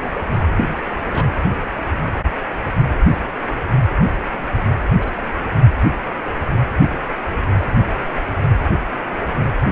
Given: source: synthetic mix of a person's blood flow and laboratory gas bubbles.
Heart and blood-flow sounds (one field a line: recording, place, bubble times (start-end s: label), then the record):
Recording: Doppler ultrasound of blood flow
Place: precordium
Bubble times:
0.56-0.64 s: bubbles
1.04-1.38 s: bubbles
4.97-5.12 s: bubbles
5.17-5.23 s: bubbles
From the record:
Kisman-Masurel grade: 121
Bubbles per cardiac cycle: 1 to 2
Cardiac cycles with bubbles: 10 to 50%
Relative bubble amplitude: barely perceptible (0.100 to 0.250)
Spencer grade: 2 (many but less than half of the cardiac periods contain bubble signals, singularly or in groups)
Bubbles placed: anywhere in the cardiac cycle